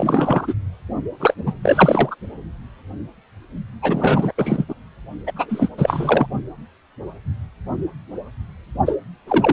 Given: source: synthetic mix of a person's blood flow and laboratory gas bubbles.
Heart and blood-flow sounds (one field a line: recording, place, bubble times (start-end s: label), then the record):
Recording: Doppler ultrasound of blood flow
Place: precordium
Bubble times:
0.00-0.54 s: bubbles
1.20-1.34 s: bubbles
1.46-1.54 s: bubbles
1.62-2.15 s: bubbles
3.81-4.32 s: bubbles
4.38-4.65 s: bubbles
4.68-4.74 s: bubbles
5.26-5.33 s: bubbles
5.36-5.69 s: bubbles
5.78-6.27 s: bubbles
8.86-8.96 s: bubbles
9.27-9.53 s: bubbles
From the record:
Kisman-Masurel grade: 333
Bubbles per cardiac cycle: rolling drumbeat, 9 or more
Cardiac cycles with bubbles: 50 to 99%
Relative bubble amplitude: loud (0.450 to 0.775)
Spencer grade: 3 (all of the cardiac periods contain showers or single bubble signals, but not dominating or overriding the cardiac motion signals)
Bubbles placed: only in the low amplitude regions of the cardiac cycle